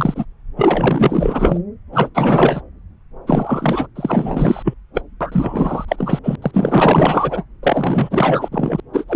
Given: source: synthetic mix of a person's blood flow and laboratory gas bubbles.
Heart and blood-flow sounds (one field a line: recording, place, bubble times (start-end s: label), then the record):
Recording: Doppler ultrasound of blood flow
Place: subclavian vein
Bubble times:
0.00-0.25 s: bubbles
0.56-1.58 s: bubbles
1.92-2.09 s: bubbles
2.15-2.61 s: bubbles
3.27-3.86 s: bubbles
3.95-4.74 s: bubbles
4.95-5.02 s: bubbles
5.21-5.85 s: bubbles
5.88-6.19 s: bubbles
6.23-6.36 s: bubbles
6.42-6.51 s: bubbles
6.54-7.45 s: bubbles
7.62-8.49 s: bubbles
8.52-8.80 s: bubbles
8.93-9.04 s: bubbles
9.08-9.16 s: bubbles
From the record:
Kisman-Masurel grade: 444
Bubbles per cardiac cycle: continuous sound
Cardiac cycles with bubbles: 100%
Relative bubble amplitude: maximal (0.775 to 0.999)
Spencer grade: 4 (maximum detectable bubble signal sounding continuously throughout systole and diastole of every cardiac period, and overriding the amplitude of the normal cardiac signals)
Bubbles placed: anywhere in the cardiac cycle